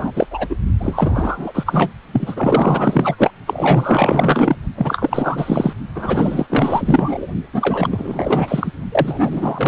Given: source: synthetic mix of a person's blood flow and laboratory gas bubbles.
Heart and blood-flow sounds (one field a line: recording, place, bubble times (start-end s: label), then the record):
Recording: Doppler ultrasound of blood flow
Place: precordium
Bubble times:
0.00-0.11 s: bubbles
0.15-0.27 s: bubbles
0.31-0.55 s: bubbles
0.80-1.92 s: bubbles
2.12-3.31 s: bubbles
3.46-4.56 s: bubbles
4.76-5.73 s: bubbles
5.95-6.46 s: bubbles
6.49-7.27 s: bubbles
7.53-8.71 s: bubbles
8.92-9.68 s: bubbles
From the record:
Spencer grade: 4 (maximum detectable bubble signal sounding continuously throughout systole and diastole of every cardiac period, and overriding the amplitude of the normal cardiac signals)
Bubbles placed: only in the low amplitude regions of the cardiac cycle